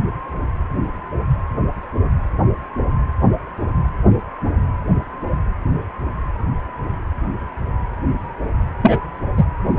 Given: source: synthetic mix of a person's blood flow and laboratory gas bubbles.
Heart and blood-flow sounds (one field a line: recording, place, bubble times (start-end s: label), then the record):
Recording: Doppler ultrasound of blood flow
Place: precordium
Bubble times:
8.81-9.05 s: bubbles
9.37-9.45 s: bubbles
From the record:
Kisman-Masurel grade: 213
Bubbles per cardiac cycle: several, 3 to 8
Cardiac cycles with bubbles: 1 to 10%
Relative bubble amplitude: loud (0.450 to 0.775)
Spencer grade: 1 (occasional bubble signal discernible with the cardiac motion signal, with majority of cardiac periods free of bubbles)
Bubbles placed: anywhere in the cardiac cycle